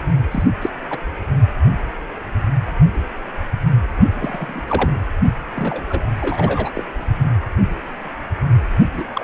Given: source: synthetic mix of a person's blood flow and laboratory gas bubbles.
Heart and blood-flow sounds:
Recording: Doppler ultrasound of blood flow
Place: precordium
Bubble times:
0.31-0.43 s: bubbles
0.61-0.69 s: bubbles
0.89-0.98 s: bubbles
4.13-4.61 s: bubbles
4.67-4.89 s: bubbles
5.54-6.10 s: bubbles
6.20-6.71 s: bubbles
6.74-6.83 s: bubbles
8.93-9.05 s: bubbles
9.13-9.24 s: bubbles
From the record:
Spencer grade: 3 (all of the cardiac periods contain showers or single bubble signals, but not dominating or overriding the cardiac motion signals)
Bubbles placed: only in the low amplitude regions of the cardiac cycle

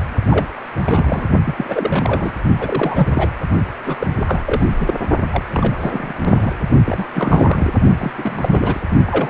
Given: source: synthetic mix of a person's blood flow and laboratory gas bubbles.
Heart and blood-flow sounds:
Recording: Doppler ultrasound of blood flow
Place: precordium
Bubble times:
0.30-0.47 s: bubbles
0.83-1.27 s: bubbles
1.46-2.31 s: bubbles
2.59-3.31 s: bubbles
3.82-3.97 s: bubbles
4.00-4.07 s: bubbles
4.19-4.68 s: bubbles
4.77-4.94 s: bubbles
5.31-5.43 s: bubbles
5.50-6.13 s: bubbles
6.24-6.52 s: bubbles
6.85-7.06 s: bubbles
7.13-7.70 s: bubbles
7.98-8.12 s: bubbles
8.17-8.80 s: bubbles
9.06-9.30 s: bubbles
From the record:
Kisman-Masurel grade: 342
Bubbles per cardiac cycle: rolling drumbeat, 9 or more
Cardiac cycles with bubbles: 100%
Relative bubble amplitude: moderate (0.250 to 0.450)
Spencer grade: 3 (all of the cardiac periods contain showers or single bubble signals, but not dominating or overriding the cardiac motion signals)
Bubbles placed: only in the low amplitude regions of the cardiac cycle

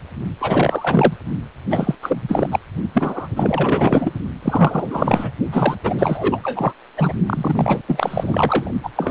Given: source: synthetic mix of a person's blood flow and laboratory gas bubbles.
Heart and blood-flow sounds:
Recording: Doppler ultrasound of blood flow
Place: precordium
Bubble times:
0.40-1.13 s: bubbles
1.70-1.95 s: bubbles
2.02-2.22 s: bubbles
2.28-2.60 s: bubbles
2.94-3.27 s: bubbles
3.36-4.11 s: bubbles
4.42-5.32 s: bubbles
5.51-5.75 s: bubbles
5.83-6.39 s: bubbles
6.42-6.73 s: bubbles
6.97-7.14 s: bubbles
7.26-7.82 s: bubbles
7.87-8.72 s: bubbles
8.83-8.90 s: bubbles
8.95-9.11 s: bubbles
From the record:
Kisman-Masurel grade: 444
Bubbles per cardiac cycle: continuous sound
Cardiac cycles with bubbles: 100%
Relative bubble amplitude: maximal (0.775 to 0.999)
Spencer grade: 4 (maximum detectable bubble signal sounding continuously throughout systole and diastole of every cardiac period, and overriding the amplitude of the normal cardiac signals)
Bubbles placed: only in the low amplitude regions of the cardiac cycle

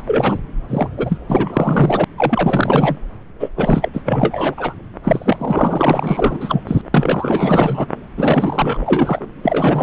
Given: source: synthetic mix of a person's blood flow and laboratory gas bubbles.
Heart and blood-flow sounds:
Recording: Doppler ultrasound of blood flow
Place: subclavian vein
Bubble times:
0.07-0.39 s: bubbles
0.68-0.88 s: bubbles
0.97-1.18 s: bubbles
1.28-2.04 s: bubbles
2.17-2.97 s: bubbles
3.40-3.50 s: bubbles
3.56-3.89 s: bubbles
3.93-4.02 s: bubbles
4.04-4.54 s: bubbles
4.57-4.74 s: bubbles
5.04-6.64 s: bubbles
6.67-6.81 s: bubbles
6.94-7.86 s: bubbles
8.16-9.27 s: bubbles
9.42-9.83 s: bubbles
From the record:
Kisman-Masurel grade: 444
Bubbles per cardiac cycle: continuous sound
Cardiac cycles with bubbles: 100%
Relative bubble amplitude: maximal (0.775 to 0.999)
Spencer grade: 4 (maximum detectable bubble signal sounding continuously throughout systole and diastole of every cardiac period, and overriding the amplitude of the normal cardiac signals)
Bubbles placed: anywhere in the cardiac cycle

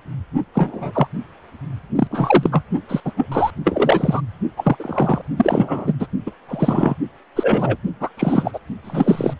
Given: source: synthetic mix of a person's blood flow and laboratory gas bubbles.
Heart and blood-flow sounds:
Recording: Doppler ultrasound of blood flow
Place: precordium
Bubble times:
0.53-1.07 s: bubbles
1.95-2.07 s: bubbles
2.10-2.63 s: bubbles
2.88-3.00 s: bubbles
3.04-3.12 s: bubbles
3.17-3.27 s: bubbles
3.31-3.50 s: bubbles
3.64-4.21 s: bubbles
4.57-4.76 s: bubbles
4.79-5.21 s: bubbles
5.37-5.93 s: bubbles
5.99-6.07 s: bubbles
6.26-6.31 s: bubbles
6.48-6.95 s: bubbles
7.36-7.77 s: bubbles
8.00-8.10 s: bubbles
8.17-8.59 s: bubbles
8.84-9.34 s: bubbles
From the record:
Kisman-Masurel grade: 233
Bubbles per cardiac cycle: several, 3 to 8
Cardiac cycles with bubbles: 50 to 99%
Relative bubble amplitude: loud (0.450 to 0.775)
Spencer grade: 3 (all of the cardiac periods contain showers or single bubble signals, but not dominating or overriding the cardiac motion signals)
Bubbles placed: only in the low amplitude regions of the cardiac cycle

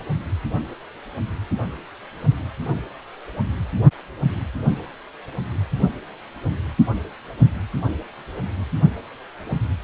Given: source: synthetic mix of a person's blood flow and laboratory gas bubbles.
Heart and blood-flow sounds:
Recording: Doppler ultrasound of blood flow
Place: precordium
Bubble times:
no bubbles
From the record:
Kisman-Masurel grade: 000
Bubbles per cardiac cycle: 0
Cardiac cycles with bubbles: 0%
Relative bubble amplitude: no bubbles discernible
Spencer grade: 0 (complete lack of bubble signals)

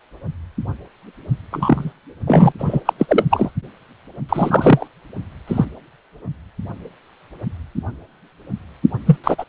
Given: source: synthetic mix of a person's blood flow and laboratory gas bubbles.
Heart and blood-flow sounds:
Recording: Doppler ultrasound of blood flow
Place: precordium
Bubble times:
1.52-1.93 s: bubbles
2.27-2.52 s: bubbles
2.58-2.80 s: bubbles
2.85-2.93 s: bubbles
2.98-3.06 s: bubbles
3.08-3.24 s: bubbles
3.30-3.51 s: bubbles
4.29-4.88 s: bubbles
5.48-5.65 s: bubbles
9.06-9.16 s: bubbles
9.23-9.44 s: bubbles
From the record:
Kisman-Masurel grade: 223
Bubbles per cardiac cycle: several, 3 to 8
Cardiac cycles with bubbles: 10 to 50%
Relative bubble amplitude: loud (0.450 to 0.775)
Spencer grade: 2 (many but less than half of the cardiac periods contain bubble signals, singularly or in groups)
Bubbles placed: anywhere in the cardiac cycle

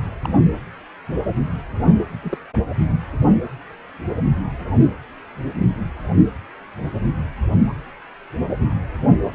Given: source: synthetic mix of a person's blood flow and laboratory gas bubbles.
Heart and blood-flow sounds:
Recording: Doppler ultrasound of blood flow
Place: precordium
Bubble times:
0.22-0.33 s: bubbles
2.23-2.38 s: bubbles
From the record:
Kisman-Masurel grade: 121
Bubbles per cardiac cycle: 1 to 2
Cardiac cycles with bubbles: 10 to 50%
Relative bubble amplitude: barely perceptible (0.100 to 0.250)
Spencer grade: 2 (many but less than half of the cardiac periods contain bubble signals, singularly or in groups)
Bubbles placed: anywhere in the cardiac cycle

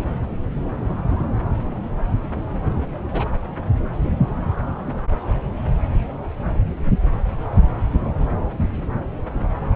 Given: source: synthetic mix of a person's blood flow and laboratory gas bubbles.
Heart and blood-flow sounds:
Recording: Doppler ultrasound of blood flow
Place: subclavian vein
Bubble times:
3.11-3.28 s: bubbles
From the record:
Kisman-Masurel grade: 111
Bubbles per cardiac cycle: 1 to 2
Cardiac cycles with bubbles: 1 to 10%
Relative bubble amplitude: barely perceptible (0.100 to 0.250)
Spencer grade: 1 (occasional bubble signal discernible with the cardiac motion signal, with majority of cardiac periods free of bubbles)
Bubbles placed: anywhere in the cardiac cycle

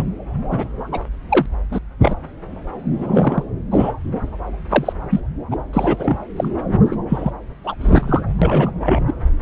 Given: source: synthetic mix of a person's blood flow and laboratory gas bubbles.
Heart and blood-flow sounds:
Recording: Doppler ultrasound of blood flow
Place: subclavian vein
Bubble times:
0.00-0.02 s: bubbles
0.50-0.68 s: bubbles
0.91-0.99 s: bubbles
1.29-1.46 s: bubbles
1.69-1.79 s: bubbles
2.01-2.15 s: bubbles
2.99-3.44 s: bubbles
3.71-3.92 s: bubbles
4.69-4.93 s: bubbles
5.10-5.20 s: bubbles
5.51-5.57 s: bubbles
5.73-6.17 s: bubbles
6.37-6.49 s: bubbles
6.84-6.96 s: bubbles
7.09-7.31 s: bubbles
7.64-7.76 s: bubbles
7.80-8.22 s: bubbles
8.42-8.71 s: bubbles
8.81-9.02 s: bubbles
9.07-9.13 s: bubbles
From the record:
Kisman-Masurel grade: 243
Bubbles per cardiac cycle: several, 3 to 8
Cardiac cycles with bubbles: 100%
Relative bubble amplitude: loud (0.450 to 0.775)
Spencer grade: 3 (all of the cardiac periods contain showers or single bubble signals, but not dominating or overriding the cardiac motion signals)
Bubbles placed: anywhere in the cardiac cycle

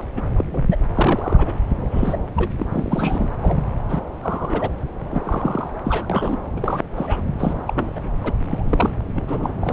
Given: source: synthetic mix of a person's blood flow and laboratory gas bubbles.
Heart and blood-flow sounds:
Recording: Doppler ultrasound of blood flow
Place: subclavian vein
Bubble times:
0.00-0.04 s: bubbles
0.16-0.22 s: bubbles
0.35-0.44 s: bubbles
0.51-0.66 s: bubbles
0.69-0.76 s: bubbles
0.94-1.53 s: bubbles
1.91-2.18 s: bubbles
2.36-2.50 s: bubbles
2.58-2.67 s: bubbles
2.72-3.29 s: bubbles
3.40-3.64 s: bubbles
3.88-4.01 s: bubbles
4.22-4.68 s: bubbles
5.11-5.70 s: bubbles
5.84-6.06 s: bubbles
6.09-6.38 s: bubbles
6.56-6.82 s: bubbles
6.96-7.22 s: bubbles
7.38-7.54 s: bubbles
7.67-8.02 s: bubbles
8.23-8.33 s: bubbles
8.49-8.90 s: bubbles
9.13-9.53 s: bubbles
9.61-9.73 s: bubbles
From the record:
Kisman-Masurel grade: 242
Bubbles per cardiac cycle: several, 3 to 8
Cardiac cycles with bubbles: 100%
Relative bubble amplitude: moderate (0.250 to 0.450)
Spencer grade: 3 (all of the cardiac periods contain showers or single bubble signals, but not dominating or overriding the cardiac motion signals)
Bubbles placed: anywhere in the cardiac cycle

